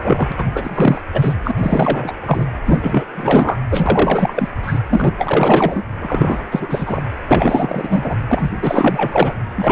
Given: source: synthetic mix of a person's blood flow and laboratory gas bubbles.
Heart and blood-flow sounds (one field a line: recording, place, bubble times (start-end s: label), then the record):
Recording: Doppler ultrasound of blood flow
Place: precordium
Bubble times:
0.01-0.32 s: bubbles
0.37-0.45 s: bubbles
0.53-1.02 s: bubbles
1.13-1.36 s: bubbles
1.43-1.54 s: bubbles
1.57-2.15 s: bubbles
2.26-2.47 s: bubbles
2.66-3.05 s: bubbles
3.15-3.60 s: bubbles
3.71-4.48 s: bubbles
4.62-4.79 s: bubbles
4.89-5.14 s: bubbles
5.18-5.83 s: bubbles
6.01-6.43 s: bubbles
6.51-7.04 s: bubbles
7.30-8.15 s: bubbles
8.28-8.50 s: bubbles
8.54-9.35 s: bubbles
9.56-9.72 s: bubbles
From the record:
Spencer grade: 4 (maximum detectable bubble signal sounding continuously throughout systole and diastole of every cardiac period, and overriding the amplitude of the normal cardiac signals)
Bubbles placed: anywhere in the cardiac cycle